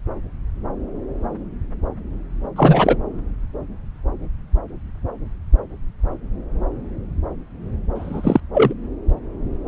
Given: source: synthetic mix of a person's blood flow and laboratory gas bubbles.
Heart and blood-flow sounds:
Doppler ultrasound of blood flow; subclavian vein
2.56-2.96 s: bubbles
7.96-8.40 s: bubbles
8.54-8.73 s: bubbles
From the record:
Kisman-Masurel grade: 223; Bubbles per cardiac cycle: several, 3 to 8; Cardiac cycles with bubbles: 10 to 50%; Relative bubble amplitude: loud (0.450 to 0.775); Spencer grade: 2 (many but less than half of the cardiac periods contain bubble signals, singularly or in groups); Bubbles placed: anywhere in the cardiac cycle

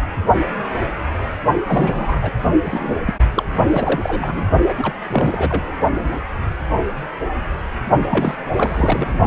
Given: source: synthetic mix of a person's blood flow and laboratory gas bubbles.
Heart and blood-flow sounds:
Doppler ultrasound of blood flow; precordium
1.67-2.31 s: bubbles
2.65-3.12 s: bubbles
3.31-3.45 s: bubbles
3.69-4.50 s: bubbles
4.68-4.73 s: bubbles
4.77-4.95 s: bubbles
5.12-5.63 s: bubbles
8.10-8.35 s: bubbles
8.54-9.18 s: bubbles
From the record:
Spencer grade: 3 (all of the cardiac periods contain showers or single bubble signals, but not dominating or overriding the cardiac motion signals); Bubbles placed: only in the low amplitude regions of the cardiac cycle

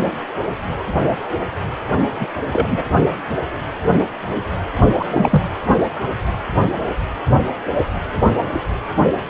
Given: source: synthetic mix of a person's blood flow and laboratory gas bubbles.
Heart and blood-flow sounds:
Doppler ultrasound of blood flow; precordium
2.19-2.28 s: bubbles
2.52-2.84 s: bubbles
4.98-5.05 s: bubbles
5.08-5.48 s: bubbles
From the record:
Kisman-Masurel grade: 223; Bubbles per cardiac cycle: several, 3 to 8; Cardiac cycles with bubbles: 10 to 50%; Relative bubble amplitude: loud (0.450 to 0.775); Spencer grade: 2 (many but less than half of the cardiac periods contain bubble signals, singularly or in groups); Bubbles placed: only in the low amplitude regions of the cardiac cycle

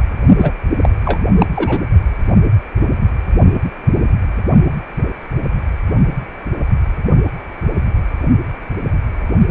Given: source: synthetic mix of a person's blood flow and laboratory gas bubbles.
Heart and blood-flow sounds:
Doppler ultrasound of blood flow; precordium
0.38-0.51 s: bubbles
0.80-0.89 s: bubbles
1.04-1.20 s: bubbles
1.38-1.46 s: bubbles
1.55-1.81 s: bubbles
From the record:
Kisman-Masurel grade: 213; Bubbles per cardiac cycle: several, 3 to 8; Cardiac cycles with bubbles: 1 to 10%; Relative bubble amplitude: loud (0.450 to 0.775); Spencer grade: 1 (occasional bubble signal discernible with the cardiac motion signal, with majority of cardiac periods free of bubbles); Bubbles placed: only in the low amplitude regions of the cardiac cycle

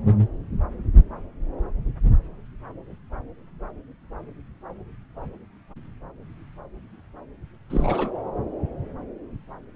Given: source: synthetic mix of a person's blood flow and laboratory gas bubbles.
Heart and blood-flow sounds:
Doppler ultrasound of blood flow; subclavian vein
7.70-8.17 s: bubbles
From the record:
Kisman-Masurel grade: 212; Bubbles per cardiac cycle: several, 3 to 8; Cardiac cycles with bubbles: 1 to 10%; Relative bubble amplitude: moderate (0.250 to 0.450); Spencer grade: 1 (occasional bubble signal discernible with the cardiac motion signal, with majority of cardiac periods free of bubbles); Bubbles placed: anywhere in the cardiac cycle

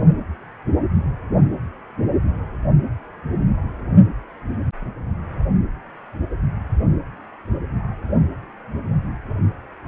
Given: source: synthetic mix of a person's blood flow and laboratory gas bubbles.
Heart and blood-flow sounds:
Doppler ultrasound of blood flow; precordium
no bubbles
From the record:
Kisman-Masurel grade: 000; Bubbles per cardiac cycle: 0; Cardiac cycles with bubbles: 0%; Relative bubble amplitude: no bubbles discernible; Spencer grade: 0 (complete lack of bubble signals)

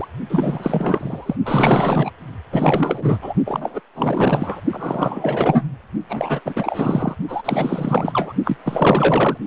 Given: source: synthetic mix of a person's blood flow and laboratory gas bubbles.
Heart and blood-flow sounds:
Doppler ultrasound of blood flow; precordium
0.00-0.08 s: bubbles
0.29-1.36 s: bubbles
1.44-2.10 s: bubbles
2.52-3.18 s: bubbles
3.21-3.33 s: bubbles
3.46-3.80 s: bubbles
3.95-4.61 s: bubbles
4.71-5.63 s: bubbles
6.08-6.41 s: bubbles
6.45-7.15 s: bubbles
7.28-8.33 s: bubbles
8.45-8.57 s: bubbles
8.64-9.38 s: bubbles
From the record:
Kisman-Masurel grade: 444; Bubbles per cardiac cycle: continuous sound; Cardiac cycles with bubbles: 100%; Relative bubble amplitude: maximal (0.775 to 0.999); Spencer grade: 4 (maximum detectable bubble signal sounding continuously throughout systole and diastole of every cardiac period, and overriding the amplitude of the normal cardiac signals); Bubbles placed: only in the low amplitude regions of the cardiac cycle

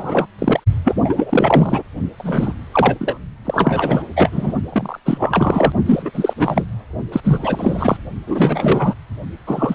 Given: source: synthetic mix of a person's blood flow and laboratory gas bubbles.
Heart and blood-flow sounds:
Doppler ultrasound of blood flow; precordium
0.00-0.26 s: bubbles
0.39-0.60 s: bubbles
0.84-1.82 s: bubbles
2.17-2.54 s: bubbles
2.71-3.17 s: bubbles
3.44-4.03 s: bubbles
4.16-4.53 s: bubbles
4.72-4.99 s: bubbles
5.05-5.72 s: bubbles
5.85-6.33 s: bubbles
6.38-6.64 s: bubbles
7.12-7.21 s: bubbles
7.24-7.97 s: bubbles
8.27-8.95 s: bubbles
9.47-9.75 s: bubbles
From the record:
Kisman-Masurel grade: 343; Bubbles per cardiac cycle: rolling drumbeat, 9 or more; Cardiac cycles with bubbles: 100%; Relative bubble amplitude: loud (0.450 to 0.775); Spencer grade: 3 (all of the cardiac periods contain showers or single bubble signals, but not dominating or overriding the cardiac motion signals); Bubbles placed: only in the low amplitude regions of the cardiac cycle

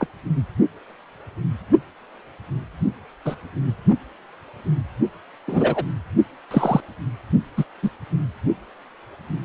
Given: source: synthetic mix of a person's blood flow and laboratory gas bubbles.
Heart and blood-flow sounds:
Doppler ultrasound of blood flow; precordium
0.00-0.07 s: bubbles
3.25-3.35 s: bubbles
5.47-5.83 s: bubbles
6.50-6.80 s: bubbles
7.57-7.64 s: bubbles
7.82-7.89 s: bubbles
From the record:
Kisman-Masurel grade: 123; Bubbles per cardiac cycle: 1 to 2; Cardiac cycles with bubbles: 10 to 50%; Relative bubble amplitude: loud (0.450 to 0.775); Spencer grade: 2 (many but less than half of the cardiac periods contain bubble signals, singularly or in groups); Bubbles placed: only in the low amplitude regions of the cardiac cycle

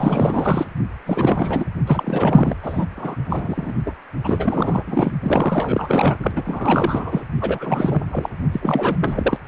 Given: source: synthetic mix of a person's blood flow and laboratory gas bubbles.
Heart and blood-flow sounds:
Doppler ultrasound of blood flow; precordium
0.00-0.67 s: bubbles
1.06-1.65 s: bubbles
1.87-2.56 s: bubbles
2.62-2.86 s: bubbles
2.97-3.16 s: bubbles
3.25-3.74 s: bubbles
3.85-3.93 s: bubbles
4.24-4.83 s: bubbles
4.87-5.12 s: bubbles
5.23-6.31 s: bubbles
6.36-7.24 s: bubbles
7.41-8.03 s: bubbles
8.10-8.29 s: bubbles
8.52-8.96 s: bubbles
8.99-9.39 s: bubbles
From the record:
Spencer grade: 4 (maximum detectable bubble signal sounding continuously throughout systole and diastole of every cardiac period, and overriding the amplitude of the normal cardiac signals); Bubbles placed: only in the low amplitude regions of the cardiac cycle

